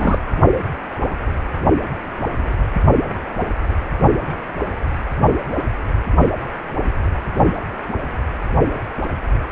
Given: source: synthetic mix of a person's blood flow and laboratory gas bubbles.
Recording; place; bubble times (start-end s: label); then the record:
Doppler ultrasound of blood flow; precordium
0.00-0.18 s: bubbles
From the record:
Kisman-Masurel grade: 212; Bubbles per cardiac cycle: several, 3 to 8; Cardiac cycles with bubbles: 1 to 10%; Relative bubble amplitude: moderate (0.250 to 0.450); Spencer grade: 1 (occasional bubble signal discernible with the cardiac motion signal, with majority of cardiac periods free of bubbles); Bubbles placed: anywhere in the cardiac cycle